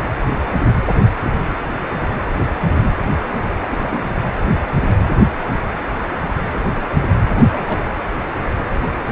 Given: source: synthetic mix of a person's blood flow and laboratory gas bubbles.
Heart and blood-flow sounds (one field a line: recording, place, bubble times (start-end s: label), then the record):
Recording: Doppler ultrasound of blood flow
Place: precordium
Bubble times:
3.61-4.05 s: bubbles
7.29-7.84 s: bubbles
From the record:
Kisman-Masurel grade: 221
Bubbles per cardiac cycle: several, 3 to 8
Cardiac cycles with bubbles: 10 to 50%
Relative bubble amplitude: barely perceptible (0.100 to 0.250)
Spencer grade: 2 (many but less than half of the cardiac periods contain bubble signals, singularly or in groups)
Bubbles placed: anywhere in the cardiac cycle